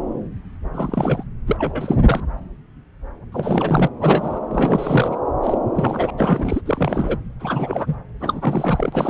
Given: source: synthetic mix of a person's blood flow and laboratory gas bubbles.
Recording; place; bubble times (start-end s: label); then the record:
Doppler ultrasound of blood flow; subclavian vein
0.74-1.23 s: bubbles
1.47-1.96 s: bubbles
2.04-2.21 s: bubbles
3.32-3.88 s: bubbles
4.00-4.40 s: bubbles
4.51-5.18 s: bubbles
5.43-5.58 s: bubbles
5.75-6.11 s: bubbles
6.17-6.61 s: bubbles
6.66-7.17 s: bubbles
7.40-7.95 s: bubbles
8.20-9.10 s: bubbles
From the record:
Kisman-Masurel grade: 332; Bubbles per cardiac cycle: rolling drumbeat, 9 or more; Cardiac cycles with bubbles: 50 to 99%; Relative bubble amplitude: moderate (0.250 to 0.450); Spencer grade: 3 (all of the cardiac periods contain showers or single bubble signals, but not dominating or overriding the cardiac motion signals); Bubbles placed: anywhere in the cardiac cycle